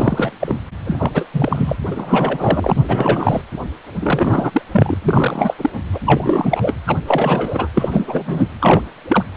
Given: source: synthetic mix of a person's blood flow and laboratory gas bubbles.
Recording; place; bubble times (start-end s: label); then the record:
Doppler ultrasound of blood flow; precordium
0.00-0.31 s: bubbles
0.40-0.60 s: bubbles
0.84-1.11 s: bubbles
1.14-1.25 s: bubbles
1.34-1.76 s: bubbles
1.91-3.42 s: bubbles
4.00-4.62 s: bubbles
4.72-4.96 s: bubbles
5.01-5.54 s: bubbles
5.58-5.70 s: bubbles
5.92-6.00 s: bubbles
6.05-6.73 s: bubbles
6.86-6.99 s: bubbles
7.06-7.67 s: bubbles
7.74-8.48 s: bubbles
8.60-8.82 s: bubbles
9.08-9.24 s: bubbles
From the record:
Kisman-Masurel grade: 343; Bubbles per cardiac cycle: rolling drumbeat, 9 or more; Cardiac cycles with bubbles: 100%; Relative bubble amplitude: loud (0.450 to 0.775); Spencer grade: 3 (all of the cardiac periods contain showers or single bubble signals, but not dominating or overriding the cardiac motion signals); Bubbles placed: anywhere in the cardiac cycle